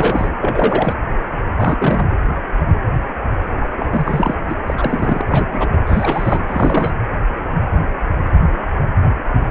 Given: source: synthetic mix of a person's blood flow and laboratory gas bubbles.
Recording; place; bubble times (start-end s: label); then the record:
Doppler ultrasound of blood flow; precordium
0.00-0.30 s: bubbles
0.40-0.93 s: bubbles
1.55-2.08 s: bubbles
3.76-4.35 s: bubbles
4.49-4.54 s: bubbles
4.67-4.74 s: bubbles
4.77-5.21 s: bubbles
5.25-5.69 s: bubbles
5.72-5.76 s: bubbles
5.86-6.45 s: bubbles
6.47-6.94 s: bubbles
From the record:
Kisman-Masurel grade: 332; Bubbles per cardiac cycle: rolling drumbeat, 9 or more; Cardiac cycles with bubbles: 50 to 99%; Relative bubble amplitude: moderate (0.250 to 0.450); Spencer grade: 3 (all of the cardiac periods contain showers or single bubble signals, but not dominating or overriding the cardiac motion signals); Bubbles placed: anywhere in the cardiac cycle